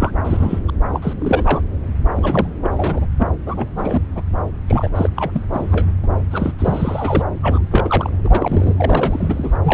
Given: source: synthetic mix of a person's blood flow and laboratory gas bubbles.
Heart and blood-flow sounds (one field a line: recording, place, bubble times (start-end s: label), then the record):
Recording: Doppler ultrasound of blood flow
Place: subclavian vein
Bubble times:
0.00-0.11 s: bubbles
0.25-0.59 s: bubbles
0.68-0.70 s: bubbles
0.92-1.14 s: bubbles
1.19-1.61 s: bubbles
2.15-2.53 s: bubbles
2.62-3.08 s: bubbles
3.19-3.28 s: bubbles
3.46-3.69 s: bubbles
3.75-4.02 s: bubbles
4.15-4.22 s: bubbles
4.67-4.90 s: bubbles
4.95-5.10 s: bubbles
5.16-5.43 s: bubbles
5.53-5.87 s: bubbles
6.04-6.07 s: bubbles
6.31-6.52 s: bubbles
6.59-7.23 s: bubbles
7.41-7.65 s: bubbles
7.71-8.10 s: bubbles
8.24-8.74 s: bubbles
8.77-9.57 s: bubbles
9.63-9.73 s: bubbles
From the record:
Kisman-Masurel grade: 342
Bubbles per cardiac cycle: rolling drumbeat, 9 or more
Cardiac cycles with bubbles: 100%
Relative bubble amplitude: moderate (0.250 to 0.450)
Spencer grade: 3 (all of the cardiac periods contain showers or single bubble signals, but not dominating or overriding the cardiac motion signals)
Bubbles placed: anywhere in the cardiac cycle